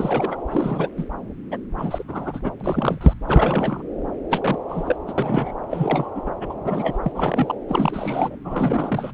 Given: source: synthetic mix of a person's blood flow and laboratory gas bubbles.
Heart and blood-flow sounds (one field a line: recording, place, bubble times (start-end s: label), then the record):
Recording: Doppler ultrasound of blood flow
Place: subclavian vein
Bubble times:
0.00-0.37 s: bubbles
0.51-0.89 s: bubbles
0.97-1.04 s: bubbles
1.51-1.57 s: bubbles
1.77-2.03 s: bubbles
2.08-2.40 s: bubbles
2.44-2.52 s: bubbles
2.60-3.14 s: bubbles
3.28-3.83 s: bubbles
4.29-4.58 s: bubbles
4.70-4.96 s: bubbles
5.07-5.13 s: bubbles
5.17-5.53 s: bubbles
5.70-6.11 s: bubbles
6.15-6.22 s: bubbles
6.26-6.32 s: bubbles
6.41-6.54 s: bubbles
6.65-6.98 s: bubbles
7.02-7.55 s: bubbles
7.67-8.35 s: bubbles
8.44-9.11 s: bubbles
From the record:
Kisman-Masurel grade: 342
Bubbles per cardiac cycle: rolling drumbeat, 9 or more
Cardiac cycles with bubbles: 100%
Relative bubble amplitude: moderate (0.250 to 0.450)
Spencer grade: 3 (all of the cardiac periods contain showers or single bubble signals, but not dominating or overriding the cardiac motion signals)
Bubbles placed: anywhere in the cardiac cycle